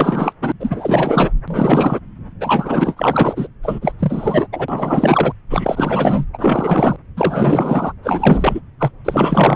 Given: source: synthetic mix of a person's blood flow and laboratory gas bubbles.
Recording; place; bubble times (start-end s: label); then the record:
Doppler ultrasound of blood flow; subclavian vein
0.00-0.33 s: bubbles
0.40-0.52 s: bubbles
0.59-1.31 s: bubbles
1.47-2.00 s: bubbles
2.41-3.48 s: bubbles
3.62-3.92 s: bubbles
3.99-4.48 s: bubbles
4.53-5.33 s: bubbles
5.50-6.25 s: bubbles
6.33-6.97 s: bubbles
7.17-7.93 s: bubbles
8.03-8.60 s: bubbles
8.79-8.91 s: bubbles
9.04-9.56 s: bubbles
From the record:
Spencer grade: 4 (maximum detectable bubble signal sounding continuously throughout systole and diastole of every cardiac period, and overriding the amplitude of the normal cardiac signals); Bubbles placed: anywhere in the cardiac cycle